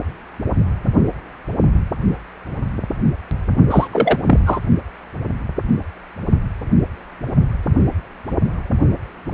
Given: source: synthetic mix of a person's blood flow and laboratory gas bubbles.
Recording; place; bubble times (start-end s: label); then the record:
Doppler ultrasound of blood flow; precordium
3.70-3.88 s: bubbles
3.92-4.18 s: bubbles
4.25-4.39 s: bubbles
4.46-4.59 s: bubbles
From the record:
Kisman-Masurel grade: 213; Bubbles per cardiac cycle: several, 3 to 8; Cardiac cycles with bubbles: 1 to 10%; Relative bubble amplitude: loud (0.450 to 0.775); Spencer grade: 1 (occasional bubble signal discernible with the cardiac motion signal, with majority of cardiac periods free of bubbles); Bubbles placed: only in the low amplitude regions of the cardiac cycle